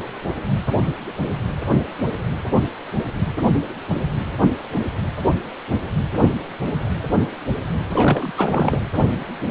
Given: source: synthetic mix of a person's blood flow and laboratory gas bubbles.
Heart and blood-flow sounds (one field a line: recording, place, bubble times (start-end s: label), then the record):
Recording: Doppler ultrasound of blood flow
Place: precordium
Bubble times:
7.94-8.32 s: bubbles
8.37-8.80 s: bubbles
From the record:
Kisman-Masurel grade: 212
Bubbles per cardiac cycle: several, 3 to 8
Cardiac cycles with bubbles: 1 to 10%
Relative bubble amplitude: moderate (0.250 to 0.450)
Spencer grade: 1 (occasional bubble signal discernible with the cardiac motion signal, with majority of cardiac periods free of bubbles)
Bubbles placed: anywhere in the cardiac cycle